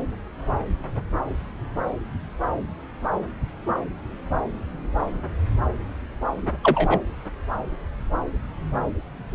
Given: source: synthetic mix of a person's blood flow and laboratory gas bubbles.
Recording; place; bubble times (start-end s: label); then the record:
Doppler ultrasound of blood flow; subclavian vein
6.63-7.00 s: bubbles
From the record:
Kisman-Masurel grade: 113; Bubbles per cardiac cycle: 1 to 2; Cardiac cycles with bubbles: 1 to 10%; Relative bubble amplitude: loud (0.450 to 0.775); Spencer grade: 1 (occasional bubble signal discernible with the cardiac motion signal, with majority of cardiac periods free of bubbles); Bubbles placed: anywhere in the cardiac cycle